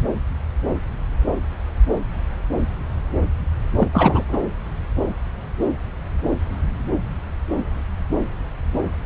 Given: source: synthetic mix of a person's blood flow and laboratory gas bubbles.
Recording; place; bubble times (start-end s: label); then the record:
Doppler ultrasound of blood flow; subclavian vein
3.76-3.88 s: bubbles
3.92-4.25 s: bubbles
4.29-4.39 s: bubbles
From the record:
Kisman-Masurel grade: 223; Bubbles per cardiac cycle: several, 3 to 8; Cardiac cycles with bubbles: 10 to 50%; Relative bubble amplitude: loud (0.450 to 0.775); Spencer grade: 2 (many but less than half of the cardiac periods contain bubble signals, singularly or in groups); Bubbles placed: anywhere in the cardiac cycle